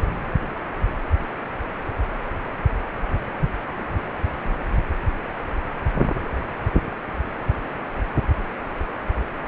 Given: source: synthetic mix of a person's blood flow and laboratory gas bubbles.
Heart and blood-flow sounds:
Doppler ultrasound of blood flow; precordium
no bubbles
From the record:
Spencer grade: 0 (complete lack of bubble signals)

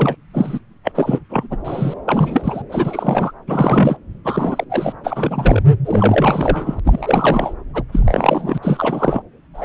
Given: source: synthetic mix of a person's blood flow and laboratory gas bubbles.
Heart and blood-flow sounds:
Doppler ultrasound of blood flow; subclavian vein
0.00-0.16 s: bubbles
0.34-0.59 s: bubbles
0.83-0.92 s: bubbles
0.95-1.23 s: bubbles
1.30-1.48 s: bubbles
1.50-1.57 s: bubbles
1.65-1.94 s: bubbles
2.08-2.62 s: bubbles
2.69-3.33 s: bubbles
3.47-3.97 s: bubbles
4.24-4.64 s: bubbles
4.69-4.93 s: bubbles
5.03-5.62 s: bubbles
5.85-6.80 s: bubbles
6.84-7.53 s: bubbles
7.73-7.83 s: bubbles
7.92-8.58 s: bubbles
8.62-9.22 s: bubbles
9.54-9.65 s: bubbles
From the record:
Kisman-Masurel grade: 343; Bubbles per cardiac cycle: rolling drumbeat, 9 or more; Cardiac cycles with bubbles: 100%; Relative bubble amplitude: loud (0.450 to 0.775); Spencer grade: 3 (all of the cardiac periods contain showers or single bubble signals, but not dominating or overriding the cardiac motion signals); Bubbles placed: anywhere in the cardiac cycle

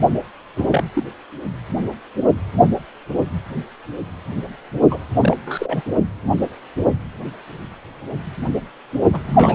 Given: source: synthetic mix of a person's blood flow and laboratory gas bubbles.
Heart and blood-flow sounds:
Doppler ultrasound of blood flow; precordium
0.56-0.84 s: bubbles
0.94-1.03 s: bubbles
4.90-4.98 s: bubbles
5.19-5.37 s: bubbles
5.45-5.82 s: bubbles
9.12-9.19 s: bubbles
9.27-9.55 s: bubbles
From the record:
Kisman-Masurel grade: 222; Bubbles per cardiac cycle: several, 3 to 8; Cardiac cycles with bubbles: 10 to 50%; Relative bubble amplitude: moderate (0.250 to 0.450); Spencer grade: 2 (many but less than half of the cardiac periods contain bubble signals, singularly or in groups); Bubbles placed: only in the low amplitude regions of the cardiac cycle

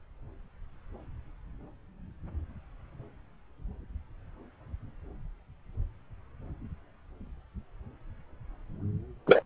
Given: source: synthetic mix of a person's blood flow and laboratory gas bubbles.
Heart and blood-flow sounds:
Doppler ultrasound of blood flow; subclavian vein
9.27-9.43 s: bubbles
From the record:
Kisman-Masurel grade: 113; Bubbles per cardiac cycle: 1 to 2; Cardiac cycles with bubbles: 1 to 10%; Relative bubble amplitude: loud (0.450 to 0.775); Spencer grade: 1 (occasional bubble signal discernible with the cardiac motion signal, with majority of cardiac periods free of bubbles); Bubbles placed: anywhere in the cardiac cycle

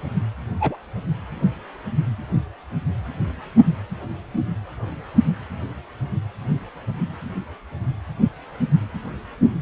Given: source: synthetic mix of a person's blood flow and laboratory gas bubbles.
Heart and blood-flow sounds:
Doppler ultrasound of blood flow; precordium
0.60-0.76 s: bubbles
From the record:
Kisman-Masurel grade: 112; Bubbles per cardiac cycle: 1 to 2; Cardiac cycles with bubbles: 1 to 10%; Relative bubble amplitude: moderate (0.250 to 0.450); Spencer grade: 1 (occasional bubble signal discernible with the cardiac motion signal, with majority of cardiac periods free of bubbles); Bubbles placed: anywhere in the cardiac cycle

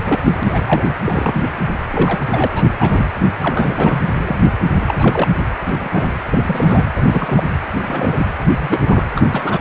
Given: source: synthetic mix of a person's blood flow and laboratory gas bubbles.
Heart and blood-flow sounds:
Doppler ultrasound of blood flow; precordium
0.05-0.19 s: bubbles
0.27-0.89 s: bubbles
1.05-1.49 s: bubbles
1.90-2.21 s: bubbles
2.29-2.47 s: bubbles
2.53-2.65 s: bubbles
2.79-3.06 s: bubbles
3.41-4.04 s: bubbles
4.15-4.37 s: bubbles
4.42-4.52 s: bubbles
4.81-5.28 s: bubbles
5.69-5.89 s: bubbles
5.93-6.11 s: bubbles
6.32-6.86 s: bubbles
6.96-7.43 s: bubbles
7.74-8.27 s: bubbles
8.60-9.04 s: bubbles
9.15-9.60 s: bubbles
From the record:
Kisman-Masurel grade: 242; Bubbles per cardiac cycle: several, 3 to 8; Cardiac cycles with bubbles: 100%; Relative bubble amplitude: moderate (0.250 to 0.450); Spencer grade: 3 (all of the cardiac periods contain showers or single bubble signals, but not dominating or overriding the cardiac motion signals); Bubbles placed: anywhere in the cardiac cycle

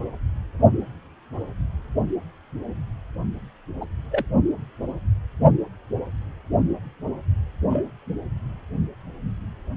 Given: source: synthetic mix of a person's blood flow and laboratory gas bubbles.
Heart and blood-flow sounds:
Doppler ultrasound of blood flow; precordium
3.80-3.85 s: bubbles
4.11-4.26 s: bubbles
7.70-7.83 s: bubbles
From the record:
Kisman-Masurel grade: 122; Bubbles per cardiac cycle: 1 to 2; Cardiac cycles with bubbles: 10 to 50%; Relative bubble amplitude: moderate (0.250 to 0.450); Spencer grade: 2 (many but less than half of the cardiac periods contain bubble signals, singularly or in groups); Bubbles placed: only in the low amplitude regions of the cardiac cycle

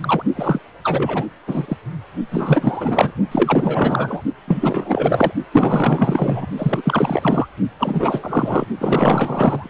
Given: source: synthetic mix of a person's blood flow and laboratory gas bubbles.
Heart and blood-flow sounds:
Doppler ultrasound of blood flow; precordium
0.00-0.23 s: bubbles
0.35-0.61 s: bubbles
0.83-1.26 s: bubbles
1.46-1.77 s: bubbles
2.31-3.13 s: bubbles
3.31-4.21 s: bubbles
4.48-5.32 s: bubbles
5.53-6.46 s: bubbles
6.57-7.47 s: bubbles
7.79-8.67 s: bubbles
8.78-9.69 s: bubbles
From the record:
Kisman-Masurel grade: 444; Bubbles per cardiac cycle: continuous sound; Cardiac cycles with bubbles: 100%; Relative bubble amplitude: maximal (0.775 to 0.999); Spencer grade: 4 (maximum detectable bubble signal sounding continuously throughout systole and diastole of every cardiac period, and overriding the amplitude of the normal cardiac signals); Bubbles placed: only in the low amplitude regions of the cardiac cycle

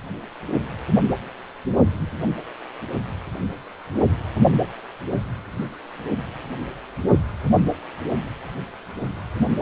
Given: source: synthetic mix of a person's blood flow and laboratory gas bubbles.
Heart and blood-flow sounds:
Doppler ultrasound of blood flow; precordium
no bubbles
From the record:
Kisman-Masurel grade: 000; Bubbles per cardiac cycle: 0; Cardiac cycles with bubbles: 0%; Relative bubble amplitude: no bubbles discernible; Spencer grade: 0 (complete lack of bubble signals)

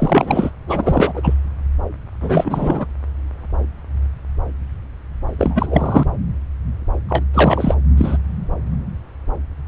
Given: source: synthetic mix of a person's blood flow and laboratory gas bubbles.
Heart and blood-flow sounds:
Doppler ultrasound of blood flow; subclavian vein
0.00-0.50 s: bubbles
0.68-1.34 s: bubbles
2.21-2.85 s: bubbles
5.39-6.08 s: bubbles
7.08-7.24 s: bubbles
7.33-7.75 s: bubbles
7.97-8.17 s: bubbles
From the record:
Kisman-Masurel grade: 333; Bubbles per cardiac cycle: rolling drumbeat, 9 or more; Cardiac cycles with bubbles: 50 to 99%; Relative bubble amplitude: loud (0.450 to 0.775); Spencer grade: 3 (all of the cardiac periods contain showers or single bubble signals, but not dominating or overriding the cardiac motion signals); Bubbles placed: anywhere in the cardiac cycle

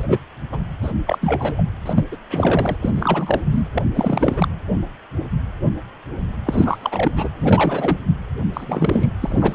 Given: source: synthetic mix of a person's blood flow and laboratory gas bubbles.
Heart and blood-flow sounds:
Doppler ultrasound of blood flow; precordium
0.00-0.05 s: bubbles
0.08-0.18 s: bubbles
0.52-0.58 s: bubbles
0.82-0.93 s: bubbles
1.06-1.18 s: bubbles
1.21-1.62 s: bubbles
1.85-2.06 s: bubbles
2.11-2.17 s: bubbles
2.30-2.76 s: bubbles
2.82-2.90 s: bubbles
2.94-3.41 s: bubbles
3.50-3.69 s: bubbles
3.73-3.82 s: bubbles
3.94-4.48 s: bubbles
6.45-7.12 s: bubbles
7.15-7.29 s: bubbles
7.38-7.99 s: bubbles
8.53-9.07 s: bubbles
9.21-9.55 s: bubbles
From the record:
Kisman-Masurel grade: 332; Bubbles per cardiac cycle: rolling drumbeat, 9 or more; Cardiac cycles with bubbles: 50 to 99%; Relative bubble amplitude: moderate (0.250 to 0.450); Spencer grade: 3 (all of the cardiac periods contain showers or single bubble signals, but not dominating or overriding the cardiac motion signals); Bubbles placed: anywhere in the cardiac cycle

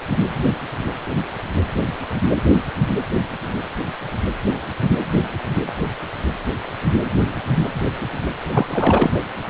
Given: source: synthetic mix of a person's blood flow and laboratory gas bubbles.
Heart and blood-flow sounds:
Doppler ultrasound of blood flow; precordium
8.51-8.67 s: bubbles
8.70-9.11 s: bubbles
From the record:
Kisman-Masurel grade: 212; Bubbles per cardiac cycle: several, 3 to 8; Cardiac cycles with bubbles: 1 to 10%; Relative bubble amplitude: moderate (0.250 to 0.450); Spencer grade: 1 (occasional bubble signal discernible with the cardiac motion signal, with majority of cardiac periods free of bubbles); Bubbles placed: anywhere in the cardiac cycle

